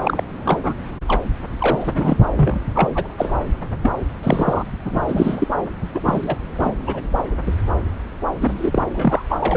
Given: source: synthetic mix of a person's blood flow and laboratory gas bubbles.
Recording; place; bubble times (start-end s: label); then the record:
Doppler ultrasound of blood flow; subclavian vein
0.00-0.21 s: bubbles
0.44-0.59 s: bubbles
0.63-0.74 s: bubbles
1.08-1.22 s: bubbles
1.59-2.17 s: bubbles
2.36-2.59 s: bubbles
2.75-2.89 s: bubbles
2.94-3.12 s: bubbles
3.17-3.32 s: bubbles
3.83-3.92 s: bubbles
4.23-4.63 s: bubbles
4.85-5.00 s: bubbles
5.08-5.47 s: bubbles
5.94-6.00 s: bubbles
6.05-6.37 s: bubbles
6.58-6.74 s: bubbles
6.87-7.01 s: bubbles
7.46-7.54 s: bubbles
8.41-8.83 s: bubbles
8.94-9.22 s: bubbles
9.29-9.37 s: bubbles
9.40-9.57 s: bubbles
From the record:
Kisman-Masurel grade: 242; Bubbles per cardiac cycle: several, 3 to 8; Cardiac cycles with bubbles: 100%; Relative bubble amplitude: moderate (0.250 to 0.450); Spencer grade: 3 (all of the cardiac periods contain showers or single bubble signals, but not dominating or overriding the cardiac motion signals); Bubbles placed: anywhere in the cardiac cycle